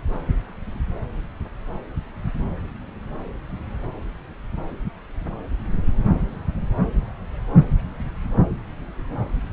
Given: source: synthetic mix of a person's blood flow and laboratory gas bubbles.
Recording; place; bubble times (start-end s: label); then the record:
Doppler ultrasound of blood flow; subclavian vein
no bubbles
From the record:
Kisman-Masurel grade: 000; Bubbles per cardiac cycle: 0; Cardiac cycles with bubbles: 0%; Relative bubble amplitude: no bubbles discernible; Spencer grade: 0 (complete lack of bubble signals)